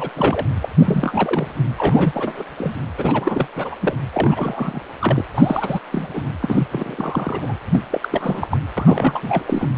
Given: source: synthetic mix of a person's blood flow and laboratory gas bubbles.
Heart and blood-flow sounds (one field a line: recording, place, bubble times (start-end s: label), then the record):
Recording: Doppler ultrasound of blood flow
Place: precordium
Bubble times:
0.00-0.11 s: bubbles
0.15-0.46 s: bubbles
0.61-0.68 s: bubbles
0.78-1.54 s: bubbles
1.78-2.44 s: bubbles
2.58-2.75 s: bubbles
2.98-3.48 s: bubbles
3.56-3.75 s: bubbles
3.80-3.95 s: bubbles
4.12-4.80 s: bubbles
5.00-5.25 s: bubbles
5.34-5.80 s: bubbles
5.92-6.22 s: bubbles
6.42-6.66 s: bubbles
6.71-7.58 s: bubbles
7.72-7.80 s: bubbles
7.91-8.47 s: bubbles
8.51-8.59 s: bubbles
8.77-9.44 s: bubbles
9.46-9.68 s: bubbles
From the record:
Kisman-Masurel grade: 342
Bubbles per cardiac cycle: rolling drumbeat, 9 or more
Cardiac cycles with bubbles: 100%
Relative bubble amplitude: moderate (0.250 to 0.450)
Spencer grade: 3 (all of the cardiac periods contain showers or single bubble signals, but not dominating or overriding the cardiac motion signals)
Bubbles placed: anywhere in the cardiac cycle